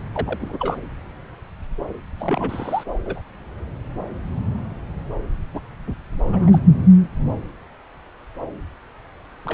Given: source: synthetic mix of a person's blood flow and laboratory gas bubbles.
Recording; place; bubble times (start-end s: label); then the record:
Doppler ultrasound of blood flow; subclavian vein
0.15-0.38 s: bubbles
0.40-0.78 s: bubbles
2.19-2.83 s: bubbles
3.05-3.21 s: bubbles
5.54-5.60 s: bubbles
5.87-5.94 s: bubbles
6.25-6.60 s: bubbles
9.45-9.54 s: bubbles
From the record:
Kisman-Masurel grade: 222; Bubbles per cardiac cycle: several, 3 to 8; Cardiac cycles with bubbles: 10 to 50%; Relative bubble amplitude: moderate (0.250 to 0.450); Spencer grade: 2 (many but less than half of the cardiac periods contain bubble signals, singularly or in groups); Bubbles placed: anywhere in the cardiac cycle